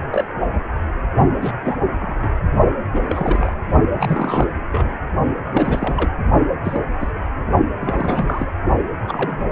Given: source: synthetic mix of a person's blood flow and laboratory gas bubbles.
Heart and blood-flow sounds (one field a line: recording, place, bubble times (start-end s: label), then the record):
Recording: Doppler ultrasound of blood flow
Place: precordium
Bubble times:
0.11-0.25 s: bubbles
1.33-1.54 s: bubbles
1.64-1.77 s: bubbles
1.99-2.31 s: bubbles
2.93-3.53 s: bubbles
3.97-4.47 s: bubbles
4.71-4.97 s: bubbles
5.51-6.10 s: bubbles
6.64-6.80 s: bubbles
7.00-7.11 s: bubbles
7.67-8.54 s: bubbles
9.08-9.46 s: bubbles
From the record:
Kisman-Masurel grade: 242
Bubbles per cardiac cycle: several, 3 to 8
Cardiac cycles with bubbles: 100%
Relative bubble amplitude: moderate (0.250 to 0.450)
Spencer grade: 3 (all of the cardiac periods contain showers or single bubble signals, but not dominating or overriding the cardiac motion signals)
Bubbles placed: only in the low amplitude regions of the cardiac cycle